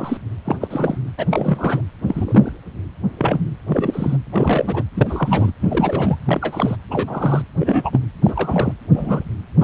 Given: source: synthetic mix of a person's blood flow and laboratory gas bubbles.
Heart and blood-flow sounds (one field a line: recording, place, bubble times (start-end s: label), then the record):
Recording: Doppler ultrasound of blood flow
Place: precordium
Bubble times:
0.00-0.17 s: bubbles
0.44-0.56 s: bubbles
0.61-0.67 s: bubbles
0.70-0.97 s: bubbles
1.18-1.25 s: bubbles
1.30-1.82 s: bubbles
2.07-2.52 s: bubbles
3.18-3.41 s: bubbles
3.68-4.17 s: bubbles
4.32-4.84 s: bubbles
4.94-5.52 s: bubbles
5.61-6.17 s: bubbles
6.25-6.77 s: bubbles
6.91-7.42 s: bubbles
7.59-8.00 s: bubbles
8.23-8.73 s: bubbles
8.91-9.23 s: bubbles
9.59-9.64 s: bubbles
From the record:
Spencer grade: 3 (all of the cardiac periods contain showers or single bubble signals, but not dominating or overriding the cardiac motion signals)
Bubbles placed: anywhere in the cardiac cycle